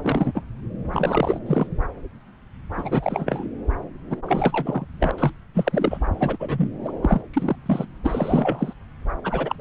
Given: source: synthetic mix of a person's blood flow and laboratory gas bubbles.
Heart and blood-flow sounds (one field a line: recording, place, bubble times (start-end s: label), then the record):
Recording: Doppler ultrasound of blood flow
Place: subclavian vein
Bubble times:
0.03-0.42 s: bubbles
0.93-1.40 s: bubbles
1.46-1.67 s: bubbles
2.76-3.48 s: bubbles
4.09-4.16 s: bubbles
4.27-4.86 s: bubbles
4.90-4.95 s: bubbles
4.99-5.11 s: bubbles
5.18-5.31 s: bubbles
5.54-5.97 s: bubbles
6.14-6.37 s: bubbles
6.40-6.70 s: bubbles
6.84-6.91 s: bubbles
7.02-7.21 s: bubbles
7.33-7.56 s: bubbles
7.65-7.85 s: bubbles
8.04-8.73 s: bubbles
9.24-9.55 s: bubbles
9.58-9.61 s: bubbles
From the record:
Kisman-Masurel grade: 332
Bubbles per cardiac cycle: rolling drumbeat, 9 or more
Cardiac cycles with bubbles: 50 to 99%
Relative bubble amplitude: moderate (0.250 to 0.450)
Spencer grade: 3 (all of the cardiac periods contain showers or single bubble signals, but not dominating or overriding the cardiac motion signals)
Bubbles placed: anywhere in the cardiac cycle